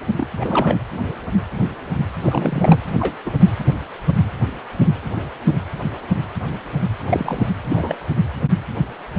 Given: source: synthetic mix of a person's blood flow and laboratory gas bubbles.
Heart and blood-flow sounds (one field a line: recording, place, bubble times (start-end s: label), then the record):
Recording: Doppler ultrasound of blood flow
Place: precordium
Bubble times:
0.17-0.28 s: bubbles
0.40-0.79 s: bubbles
2.22-2.79 s: bubbles
3.00-3.16 s: bubbles
3.25-3.31 s: bubbles
7.10-7.50 s: bubbles
7.63-7.96 s: bubbles
From the record:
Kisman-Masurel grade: 222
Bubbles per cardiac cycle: several, 3 to 8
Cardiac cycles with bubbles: 10 to 50%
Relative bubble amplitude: moderate (0.250 to 0.450)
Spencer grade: 2 (many but less than half of the cardiac periods contain bubble signals, singularly or in groups)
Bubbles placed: anywhere in the cardiac cycle